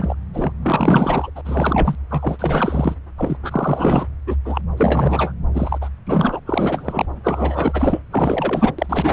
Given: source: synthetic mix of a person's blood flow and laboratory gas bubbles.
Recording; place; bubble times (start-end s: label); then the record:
Doppler ultrasound of blood flow; subclavian vein
0.00-0.15 s: bubbles
0.34-0.52 s: bubbles
0.62-1.31 s: bubbles
1.35-1.42 s: bubbles
1.45-1.95 s: bubbles
2.10-2.95 s: bubbles
3.17-3.37 s: bubbles
3.43-4.08 s: bubbles
4.26-4.36 s: bubbles
4.45-4.62 s: bubbles
4.76-5.32 s: bubbles
5.54-5.79 s: bubbles
5.81-5.89 s: bubbles
6.07-6.40 s: bubbles
6.46-7.06 s: bubbles
7.24-7.99 s: bubbles
8.11-8.72 s: bubbles
8.78-9.13 s: bubbles
From the record:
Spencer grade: 4 (maximum detectable bubble signal sounding continuously throughout systole and diastole of every cardiac period, and overriding the amplitude of the normal cardiac signals); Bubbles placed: anywhere in the cardiac cycle